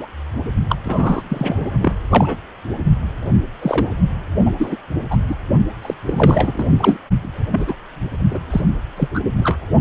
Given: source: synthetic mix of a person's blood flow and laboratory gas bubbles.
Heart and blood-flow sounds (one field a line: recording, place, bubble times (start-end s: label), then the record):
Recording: Doppler ultrasound of blood flow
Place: precordium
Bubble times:
0.00-0.07 s: bubbles
0.69-0.76 s: bubbles
0.84-1.23 s: bubbles
1.29-1.71 s: bubbles
1.81-1.93 s: bubbles
2.09-2.37 s: bubbles
3.61-3.92 s: bubbles
4.46-4.52 s: bubbles
4.58-4.76 s: bubbles
5.10-5.17 s: bubbles
5.29-5.35 s: bubbles
5.81-5.94 s: bubbles
6.02-6.67 s: bubbles
6.77-6.97 s: bubbles
7.22-7.75 s: bubbles
8.31-8.39 s: bubbles
8.50-8.62 s: bubbles
8.96-9.09 s: bubbles
9.13-9.20 s: bubbles
9.37-9.58 s: bubbles
From the record:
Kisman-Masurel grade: 243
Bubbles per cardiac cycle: several, 3 to 8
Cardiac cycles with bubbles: 100%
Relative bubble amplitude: loud (0.450 to 0.775)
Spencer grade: 3 (all of the cardiac periods contain showers or single bubble signals, but not dominating or overriding the cardiac motion signals)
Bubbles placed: only in the low amplitude regions of the cardiac cycle